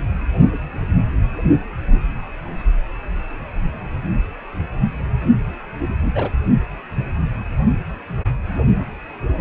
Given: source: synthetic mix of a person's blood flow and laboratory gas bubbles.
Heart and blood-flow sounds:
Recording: Doppler ultrasound of blood flow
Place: precordium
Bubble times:
6.14-6.30 s: bubbles
From the record:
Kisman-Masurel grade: 112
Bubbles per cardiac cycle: 1 to 2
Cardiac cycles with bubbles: 1 to 10%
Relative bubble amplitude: moderate (0.250 to 0.450)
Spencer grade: 1 (occasional bubble signal discernible with the cardiac motion signal, with majority of cardiac periods free of bubbles)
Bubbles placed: anywhere in the cardiac cycle

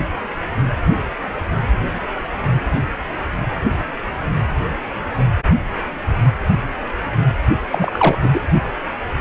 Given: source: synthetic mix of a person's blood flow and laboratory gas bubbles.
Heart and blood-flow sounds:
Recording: Doppler ultrasound of blood flow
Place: precordium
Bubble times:
7.71-8.19 s: bubbles
8.21-8.30 s: bubbles
8.33-8.41 s: bubbles
From the record:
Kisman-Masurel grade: 223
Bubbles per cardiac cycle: several, 3 to 8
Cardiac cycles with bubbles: 10 to 50%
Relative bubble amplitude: loud (0.450 to 0.775)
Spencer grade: 2 (many but less than half of the cardiac periods contain bubble signals, singularly or in groups)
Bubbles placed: only in the low amplitude regions of the cardiac cycle

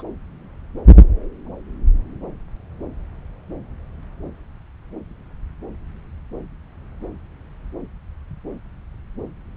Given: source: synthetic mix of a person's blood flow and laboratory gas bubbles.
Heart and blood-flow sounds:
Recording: Doppler ultrasound of blood flow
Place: subclavian vein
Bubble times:
0.00-0.03 s: bubbles
From the record:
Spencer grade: 2 (many but less than half of the cardiac periods contain bubble signals, singularly or in groups)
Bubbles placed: anywhere in the cardiac cycle

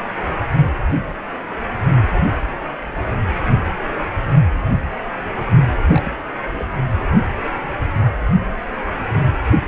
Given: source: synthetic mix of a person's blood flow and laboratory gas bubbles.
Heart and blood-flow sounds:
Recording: Doppler ultrasound of blood flow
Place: precordium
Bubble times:
5.88-6.12 s: bubbles
6.51-6.65 s: bubbles
From the record:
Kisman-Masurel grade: 211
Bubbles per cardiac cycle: several, 3 to 8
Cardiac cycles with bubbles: 1 to 10%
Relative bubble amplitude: barely perceptible (0.100 to 0.250)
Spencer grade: 1 (occasional bubble signal discernible with the cardiac motion signal, with majority of cardiac periods free of bubbles)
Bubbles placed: anywhere in the cardiac cycle

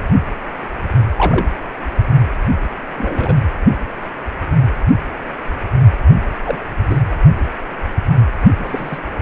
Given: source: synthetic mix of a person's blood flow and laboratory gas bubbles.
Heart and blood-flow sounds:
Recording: Doppler ultrasound of blood flow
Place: precordium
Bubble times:
1.17-1.46 s: bubbles
2.98-3.34 s: bubbles
6.45-6.58 s: bubbles
6.90-7.01 s: bubbles
8.59-8.98 s: bubbles
From the record:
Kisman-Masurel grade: 122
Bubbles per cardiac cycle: 1 to 2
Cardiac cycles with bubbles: 10 to 50%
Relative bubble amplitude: moderate (0.250 to 0.450)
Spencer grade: 2 (many but less than half of the cardiac periods contain bubble signals, singularly or in groups)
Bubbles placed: anywhere in the cardiac cycle

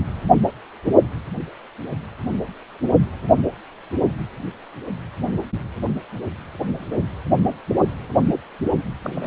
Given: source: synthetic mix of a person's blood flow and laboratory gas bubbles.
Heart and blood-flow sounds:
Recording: Doppler ultrasound of blood flow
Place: precordium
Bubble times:
9.03-9.27 s: bubbles
From the record:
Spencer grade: 1 (occasional bubble signal discernible with the cardiac motion signal, with majority of cardiac periods free of bubbles)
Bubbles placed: only in the low amplitude regions of the cardiac cycle

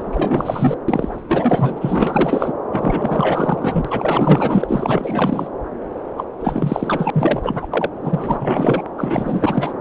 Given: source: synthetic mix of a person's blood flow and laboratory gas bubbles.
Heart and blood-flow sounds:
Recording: Doppler ultrasound of blood flow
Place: subclavian vein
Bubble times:
0.00-0.77 s: bubbles
0.88-1.21 s: bubbles
1.28-2.54 s: bubbles
2.73-5.49 s: bubbles
6.17-6.24 s: bubbles
6.40-7.67 s: bubbles
7.71-7.89 s: bubbles
8.01-8.83 s: bubbles
8.97-9.73 s: bubbles
From the record:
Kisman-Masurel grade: 444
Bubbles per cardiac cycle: continuous sound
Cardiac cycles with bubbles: 100%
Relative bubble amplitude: maximal (0.775 to 0.999)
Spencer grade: 4 (maximum detectable bubble signal sounding continuously throughout systole and diastole of every cardiac period, and overriding the amplitude of the normal cardiac signals)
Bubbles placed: anywhere in the cardiac cycle

